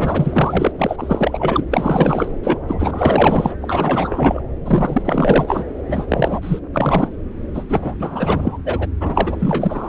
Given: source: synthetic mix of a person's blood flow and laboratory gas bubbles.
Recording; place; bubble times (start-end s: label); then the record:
Doppler ultrasound of blood flow; subclavian vein
0.00-0.72 s: bubbles
0.78-1.66 s: bubbles
1.71-2.31 s: bubbles
2.43-2.58 s: bubbles
2.67-3.55 s: bubbles
3.62-4.42 s: bubbles
4.64-5.64 s: bubbles
5.88-6.60 s: bubbles
6.73-7.09 s: bubbles
7.54-7.63 s: bubbles
7.69-8.58 s: bubbles
8.65-8.88 s: bubbles
8.98-9.89 s: bubbles
From the record:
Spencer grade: 4 (maximum detectable bubble signal sounding continuously throughout systole and diastole of every cardiac period, and overriding the amplitude of the normal cardiac signals); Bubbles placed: anywhere in the cardiac cycle